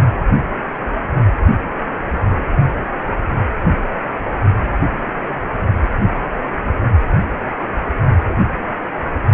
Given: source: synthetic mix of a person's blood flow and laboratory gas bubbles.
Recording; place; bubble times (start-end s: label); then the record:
Doppler ultrasound of blood flow; precordium
no bubbles
From the record:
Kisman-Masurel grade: 000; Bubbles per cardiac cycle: 0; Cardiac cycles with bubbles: 0%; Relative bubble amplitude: no bubbles discernible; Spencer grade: 0 (complete lack of bubble signals)